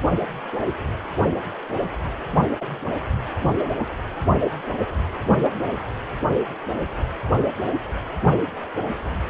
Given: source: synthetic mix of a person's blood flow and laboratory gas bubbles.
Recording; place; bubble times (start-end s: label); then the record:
Doppler ultrasound of blood flow; precordium
no bubbles
From the record:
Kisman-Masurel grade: 000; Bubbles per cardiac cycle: 0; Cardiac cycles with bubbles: 0%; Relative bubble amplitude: no bubbles discernible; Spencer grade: 0 (complete lack of bubble signals)